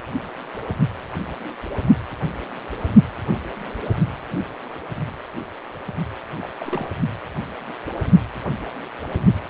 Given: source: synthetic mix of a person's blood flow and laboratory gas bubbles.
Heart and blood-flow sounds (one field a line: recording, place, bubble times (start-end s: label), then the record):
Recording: Doppler ultrasound of blood flow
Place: precordium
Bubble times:
6.40-6.49 s: bubbles
6.60-6.89 s: bubbles
From the record:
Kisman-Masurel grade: 221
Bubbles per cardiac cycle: several, 3 to 8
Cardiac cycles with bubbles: 10 to 50%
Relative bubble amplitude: barely perceptible (0.100 to 0.250)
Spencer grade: 2 (many but less than half of the cardiac periods contain bubble signals, singularly or in groups)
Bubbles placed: only in the low amplitude regions of the cardiac cycle